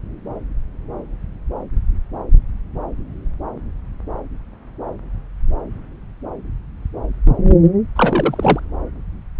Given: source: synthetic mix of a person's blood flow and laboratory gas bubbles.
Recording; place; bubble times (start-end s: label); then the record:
Doppler ultrasound of blood flow; subclavian vein
7.96-8.60 s: bubbles
From the record:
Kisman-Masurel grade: 213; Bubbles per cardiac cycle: several, 3 to 8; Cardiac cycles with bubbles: 1 to 10%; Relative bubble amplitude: loud (0.450 to 0.775); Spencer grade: 1 (occasional bubble signal discernible with the cardiac motion signal, with majority of cardiac periods free of bubbles); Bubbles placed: anywhere in the cardiac cycle